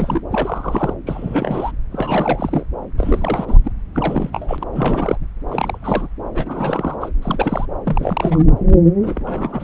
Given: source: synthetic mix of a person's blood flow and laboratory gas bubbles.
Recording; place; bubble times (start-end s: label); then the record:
Doppler ultrasound of blood flow; subclavian vein
0.00-0.21 s: bubbles
0.31-0.94 s: bubbles
1.06-1.72 s: bubbles
1.91-2.65 s: bubbles
2.98-3.58 s: bubbles
3.64-3.71 s: bubbles
3.94-4.63 s: bubbles
4.72-5.17 s: bubbles
5.49-5.78 s: bubbles
5.82-6.08 s: bubbles
6.34-6.96 s: bubbles
7.00-7.09 s: bubbles
7.22-7.66 s: bubbles
7.84-8.45 s: bubbles
8.99-9.64 s: bubbles
From the record:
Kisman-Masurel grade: 342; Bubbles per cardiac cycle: rolling drumbeat, 9 or more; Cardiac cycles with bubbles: 100%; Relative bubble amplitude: moderate (0.250 to 0.450); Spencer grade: 3 (all of the cardiac periods contain showers or single bubble signals, but not dominating or overriding the cardiac motion signals); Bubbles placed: anywhere in the cardiac cycle